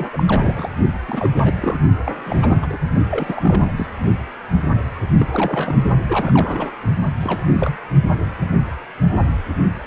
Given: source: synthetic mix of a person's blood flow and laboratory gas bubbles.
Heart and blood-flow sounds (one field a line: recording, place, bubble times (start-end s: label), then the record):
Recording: Doppler ultrasound of blood flow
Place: precordium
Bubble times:
0.00-0.07 s: bubbles
0.12-0.23 s: bubbles
0.27-0.70 s: bubbles
1.07-1.34 s: bubbles
1.37-1.80 s: bubbles
2.04-2.56 s: bubbles
2.62-2.67 s: bubbles
2.69-2.77 s: bubbles
3.11-3.71 s: bubbles
3.77-3.88 s: bubbles
4.70-4.83 s: bubbles
5.17-5.29 s: bubbles
5.32-5.76 s: bubbles
6.08-6.73 s: bubbles
7.20-7.46 s: bubbles
7.52-7.78 s: bubbles
From the record:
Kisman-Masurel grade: 332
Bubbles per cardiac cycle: rolling drumbeat, 9 or more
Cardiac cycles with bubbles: 50 to 99%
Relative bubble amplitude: moderate (0.250 to 0.450)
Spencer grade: 3 (all of the cardiac periods contain showers or single bubble signals, but not dominating or overriding the cardiac motion signals)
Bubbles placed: only in the low amplitude regions of the cardiac cycle